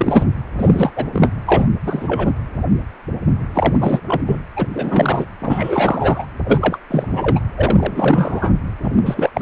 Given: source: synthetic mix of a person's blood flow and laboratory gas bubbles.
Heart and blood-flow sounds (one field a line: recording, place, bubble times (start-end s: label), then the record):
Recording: Doppler ultrasound of blood flow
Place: precordium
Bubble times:
0.00-0.25 s: bubbles
0.57-0.92 s: bubbles
0.95-1.06 s: bubbles
1.13-1.29 s: bubbles
1.46-1.69 s: bubbles
1.84-2.32 s: bubbles
3.54-4.00 s: bubbles
4.07-4.21 s: bubbles
4.25-4.42 s: bubbles
4.56-4.68 s: bubbles
4.74-5.25 s: bubbles
5.39-6.28 s: bubbles
6.46-6.78 s: bubbles
6.90-7.41 s: bubbles
7.55-8.53 s: bubbles
8.79-8.89 s: bubbles
8.93-9.30 s: bubbles
9.34-9.42 s: bubbles
From the record:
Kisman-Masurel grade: 333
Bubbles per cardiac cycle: rolling drumbeat, 9 or more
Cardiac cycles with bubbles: 50 to 99%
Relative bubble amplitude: loud (0.450 to 0.775)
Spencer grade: 3 (all of the cardiac periods contain showers or single bubble signals, but not dominating or overriding the cardiac motion signals)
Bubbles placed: anywhere in the cardiac cycle